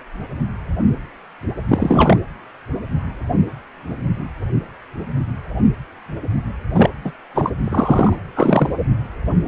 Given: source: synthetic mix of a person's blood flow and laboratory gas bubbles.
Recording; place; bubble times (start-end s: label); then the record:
Doppler ultrasound of blood flow; precordium
1.68-2.17 s: bubbles
6.75-6.90 s: bubbles
7.04-7.12 s: bubbles
7.35-7.53 s: bubbles
7.65-8.15 s: bubbles
8.35-8.70 s: bubbles
From the record:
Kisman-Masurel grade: 223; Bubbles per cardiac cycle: several, 3 to 8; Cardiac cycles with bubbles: 10 to 50%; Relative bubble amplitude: loud (0.450 to 0.775); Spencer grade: 2 (many but less than half of the cardiac periods contain bubble signals, singularly or in groups); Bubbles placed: anywhere in the cardiac cycle